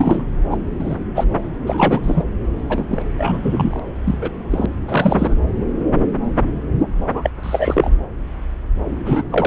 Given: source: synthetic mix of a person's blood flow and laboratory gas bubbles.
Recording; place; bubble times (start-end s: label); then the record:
Doppler ultrasound of blood flow; subclavian vein
0.00-0.24 s: bubbles
0.51-0.58 s: bubbles
0.79-0.96 s: bubbles
1.15-1.25 s: bubbles
1.65-2.01 s: bubbles
2.03-2.25 s: bubbles
2.69-3.03 s: bubbles
3.18-3.80 s: bubbles
4.05-4.18 s: bubbles
4.21-4.30 s: bubbles
4.51-4.66 s: bubbles
4.88-5.35 s: bubbles
7.13-7.30 s: bubbles
7.43-7.91 s: bubbles
9.05-9.24 s: bubbles
9.30-9.47 s: bubbles
From the record:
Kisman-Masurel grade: 233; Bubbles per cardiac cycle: several, 3 to 8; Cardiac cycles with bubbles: 50 to 99%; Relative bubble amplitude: loud (0.450 to 0.775); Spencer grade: 3 (all of the cardiac periods contain showers or single bubble signals, but not dominating or overriding the cardiac motion signals); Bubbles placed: anywhere in the cardiac cycle